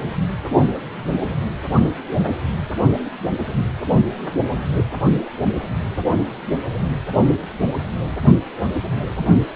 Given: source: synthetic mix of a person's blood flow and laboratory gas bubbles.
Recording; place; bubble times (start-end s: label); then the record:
Doppler ultrasound of blood flow; precordium
no bubbles
From the record:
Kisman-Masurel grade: 000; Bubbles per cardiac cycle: 0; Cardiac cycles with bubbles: 0%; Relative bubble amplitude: no bubbles discernible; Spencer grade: 0 (complete lack of bubble signals)